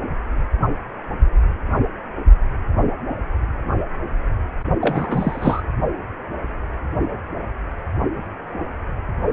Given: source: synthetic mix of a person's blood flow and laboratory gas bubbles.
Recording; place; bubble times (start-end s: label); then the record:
Doppler ultrasound of blood flow; precordium
4.81-5.62 s: bubbles
From the record:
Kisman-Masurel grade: 212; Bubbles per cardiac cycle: several, 3 to 8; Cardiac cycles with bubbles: 1 to 10%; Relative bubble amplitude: moderate (0.250 to 0.450); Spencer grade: 1 (occasional bubble signal discernible with the cardiac motion signal, with majority of cardiac periods free of bubbles); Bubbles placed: only in the low amplitude regions of the cardiac cycle